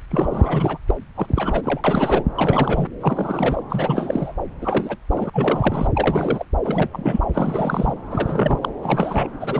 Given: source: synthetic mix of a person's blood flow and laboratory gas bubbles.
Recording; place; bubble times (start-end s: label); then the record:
Doppler ultrasound of blood flow; subclavian vein
0.10-0.78 s: bubbles
0.86-0.94 s: bubbles
1.15-1.81 s: bubbles
1.84-2.24 s: bubbles
2.35-2.88 s: bubbles
3.00-3.63 s: bubbles
3.69-4.33 s: bubbles
4.61-4.96 s: bubbles
5.10-5.30 s: bubbles
5.33-5.88 s: bubbles
5.95-6.46 s: bubbles
6.63-6.88 s: bubbles
6.92-7.21 s: bubbles
7.33-7.94 s: bubbles
8.10-8.59 s: bubbles
8.62-8.69 s: bubbles
8.82-9.28 s: bubbles
9.40-9.60 s: bubbles
From the record:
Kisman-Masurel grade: 333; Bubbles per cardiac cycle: rolling drumbeat, 9 or more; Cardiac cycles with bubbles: 50 to 99%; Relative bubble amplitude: loud (0.450 to 0.775); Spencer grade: 3 (all of the cardiac periods contain showers or single bubble signals, but not dominating or overriding the cardiac motion signals); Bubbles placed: anywhere in the cardiac cycle